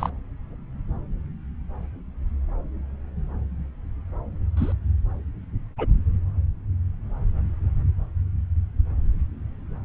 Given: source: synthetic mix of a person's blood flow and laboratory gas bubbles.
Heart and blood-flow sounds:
Doppler ultrasound of blood flow; subclavian vein
0.00-0.09 s: bubbles
4.57-4.73 s: bubbles
5.78-5.86 s: bubbles
From the record:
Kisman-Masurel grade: 121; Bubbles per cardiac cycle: 1 to 2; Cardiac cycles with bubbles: 10 to 50%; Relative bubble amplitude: barely perceptible (0.100 to 0.250); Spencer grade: 2 (many but less than half of the cardiac periods contain bubble signals, singularly or in groups); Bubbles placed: anywhere in the cardiac cycle

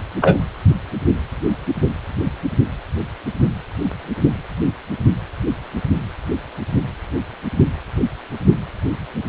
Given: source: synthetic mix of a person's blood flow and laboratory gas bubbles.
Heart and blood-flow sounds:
Doppler ultrasound of blood flow; precordium
0.21-0.39 s: bubbles
From the record:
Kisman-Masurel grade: 113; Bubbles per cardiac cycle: 1 to 2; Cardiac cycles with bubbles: 1 to 10%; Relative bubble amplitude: loud (0.450 to 0.775); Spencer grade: 1 (occasional bubble signal discernible with the cardiac motion signal, with majority of cardiac periods free of bubbles); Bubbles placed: only in the low amplitude regions of the cardiac cycle

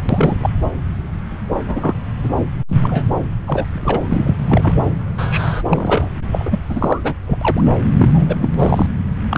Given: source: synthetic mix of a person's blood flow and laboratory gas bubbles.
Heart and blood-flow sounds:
Doppler ultrasound of blood flow; subclavian vein
0.09-0.35 s: bubbles
0.40-0.49 s: bubbles
1.66-1.94 s: bubbles
2.24-2.29 s: bubbles
2.68-3.05 s: bubbles
3.46-3.65 s: bubbles
3.72-4.33 s: bubbles
4.49-4.89 s: bubbles
5.17-5.62 s: bubbles
5.69-6.09 s: bubbles
6.31-6.58 s: bubbles
6.69-7.14 s: bubbles
7.26-7.38 s: bubbles
7.41-7.63 s: bubbles
7.99-8.38 s: bubbles
8.41-8.48 s: bubbles
8.58-8.87 s: bubbles
9.30-9.38 s: bubbles
From the record:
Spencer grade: 3 (all of the cardiac periods contain showers or single bubble signals, but not dominating or overriding the cardiac motion signals); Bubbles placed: anywhere in the cardiac cycle

